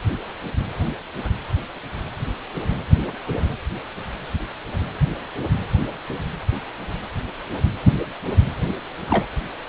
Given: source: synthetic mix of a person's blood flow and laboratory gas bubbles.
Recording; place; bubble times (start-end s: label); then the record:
Doppler ultrasound of blood flow; precordium
9.08-9.25 s: bubbles
From the record:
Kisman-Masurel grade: 112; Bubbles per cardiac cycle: 1 to 2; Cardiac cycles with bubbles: 1 to 10%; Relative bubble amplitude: moderate (0.250 to 0.450); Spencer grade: 1 (occasional bubble signal discernible with the cardiac motion signal, with majority of cardiac periods free of bubbles); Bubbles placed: anywhere in the cardiac cycle